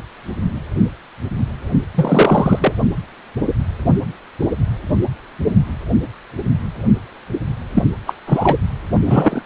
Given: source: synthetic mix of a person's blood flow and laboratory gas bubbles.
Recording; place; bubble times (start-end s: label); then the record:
Doppler ultrasound of blood flow; precordium
1.94-2.73 s: bubbles
7.73-7.83 s: bubbles
8.06-8.14 s: bubbles
8.26-8.59 s: bubbles
9.04-9.42 s: bubbles
From the record:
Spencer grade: 2 (many but less than half of the cardiac periods contain bubble signals, singularly or in groups); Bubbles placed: anywhere in the cardiac cycle